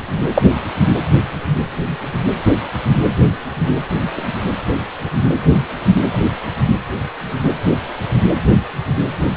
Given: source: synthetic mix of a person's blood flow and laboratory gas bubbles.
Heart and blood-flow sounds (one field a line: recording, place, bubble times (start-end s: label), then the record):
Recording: Doppler ultrasound of blood flow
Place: precordium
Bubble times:
0.34-0.42 s: bubbles
From the record:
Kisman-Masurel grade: 113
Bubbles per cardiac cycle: 1 to 2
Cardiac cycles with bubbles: 1 to 10%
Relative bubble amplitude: loud (0.450 to 0.775)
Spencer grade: 1 (occasional bubble signal discernible with the cardiac motion signal, with majority of cardiac periods free of bubbles)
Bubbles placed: anywhere in the cardiac cycle